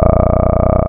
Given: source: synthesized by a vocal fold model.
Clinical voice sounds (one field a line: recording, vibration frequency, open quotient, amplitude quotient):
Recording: sustained vowel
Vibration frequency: 30 Hz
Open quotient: 0.3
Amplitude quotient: 1.4